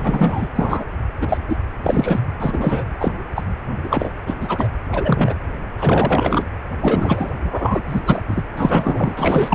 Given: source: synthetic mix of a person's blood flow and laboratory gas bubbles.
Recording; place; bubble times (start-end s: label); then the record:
Doppler ultrasound of blood flow; precordium
0.00-0.48 s: bubbles
0.55-0.85 s: bubbles
1.21-1.38 s: bubbles
1.48-1.56 s: bubbles
1.83-2.20 s: bubbles
2.39-2.83 s: bubbles
3.00-3.13 s: bubbles
3.35-3.44 s: bubbles
3.83-4.13 s: bubbles
4.26-4.35 s: bubbles
4.40-4.68 s: bubbles
4.92-5.34 s: bubbles
5.77-6.43 s: bubbles
6.80-7.31 s: bubbles
7.38-7.82 s: bubbles
7.86-8.00 s: bubbles
8.06-8.23 s: bubbles
8.28-8.43 s: bubbles
8.57-9.55 s: bubbles
From the record:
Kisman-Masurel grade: 243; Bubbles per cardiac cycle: several, 3 to 8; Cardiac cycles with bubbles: 100%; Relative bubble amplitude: loud (0.450 to 0.775); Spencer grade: 3 (all of the cardiac periods contain showers or single bubble signals, but not dominating or overriding the cardiac motion signals); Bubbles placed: anywhere in the cardiac cycle